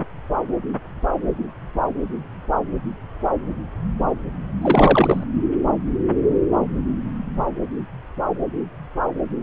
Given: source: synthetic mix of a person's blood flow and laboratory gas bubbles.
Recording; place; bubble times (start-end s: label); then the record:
Doppler ultrasound of blood flow; subclavian vein
4.62-5.24 s: bubbles
From the record:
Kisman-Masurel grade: 213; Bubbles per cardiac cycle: several, 3 to 8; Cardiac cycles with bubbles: 1 to 10%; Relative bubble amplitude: loud (0.450 to 0.775); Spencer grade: 1 (occasional bubble signal discernible with the cardiac motion signal, with majority of cardiac periods free of bubbles); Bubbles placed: anywhere in the cardiac cycle